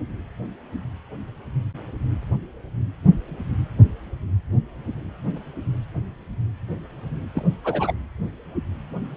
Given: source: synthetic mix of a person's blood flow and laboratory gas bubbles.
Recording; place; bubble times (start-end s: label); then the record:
Doppler ultrasound of blood flow; precordium
7.35-7.43 s: bubbles
7.64-7.94 s: bubbles
From the record:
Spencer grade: 1 (occasional bubble signal discernible with the cardiac motion signal, with majority of cardiac periods free of bubbles); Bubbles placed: anywhere in the cardiac cycle